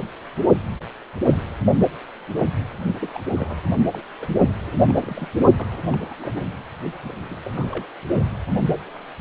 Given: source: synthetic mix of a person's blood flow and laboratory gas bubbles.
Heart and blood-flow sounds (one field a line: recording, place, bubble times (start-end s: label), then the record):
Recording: Doppler ultrasound of blood flow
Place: precordium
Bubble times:
3.00-3.20 s: bubbles
3.35-3.62 s: bubbles
3.94-4.01 s: bubbles
4.20-4.28 s: bubbles
4.67-4.71 s: bubbles
4.81-4.85 s: bubbles
4.89-4.97 s: bubbles
5.02-5.29 s: bubbles
5.58-6.14 s: bubbles
6.18-6.41 s: bubbles
6.46-6.52 s: bubbles
7.04-7.38 s: bubbles
7.45-7.67 s: bubbles
7.71-7.86 s: bubbles
From the record:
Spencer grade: 2 (many but less than half of the cardiac periods contain bubble signals, singularly or in groups)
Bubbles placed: only in the low amplitude regions of the cardiac cycle